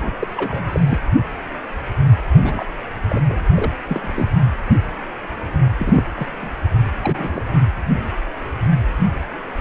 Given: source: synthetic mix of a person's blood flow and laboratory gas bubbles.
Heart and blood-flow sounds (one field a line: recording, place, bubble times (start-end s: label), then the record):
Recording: Doppler ultrasound of blood flow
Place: precordium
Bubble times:
0.00-0.10 s: bubbles
0.21-0.27 s: bubbles
0.36-0.80 s: bubbles
0.88-0.98 s: bubbles
2.35-2.65 s: bubbles
3.08-3.21 s: bubbles
3.28-3.38 s: bubbles
3.50-3.70 s: bubbles
3.88-4.12 s: bubbles
4.15-4.31 s: bubbles
5.79-6.03 s: bubbles
6.16-6.27 s: bubbles
6.41-6.49 s: bubbles
7.04-7.44 s: bubbles
From the record:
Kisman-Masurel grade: 232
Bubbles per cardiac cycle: several, 3 to 8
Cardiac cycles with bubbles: 50 to 99%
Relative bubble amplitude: moderate (0.250 to 0.450)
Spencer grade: 3 (all of the cardiac periods contain showers or single bubble signals, but not dominating or overriding the cardiac motion signals)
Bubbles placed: anywhere in the cardiac cycle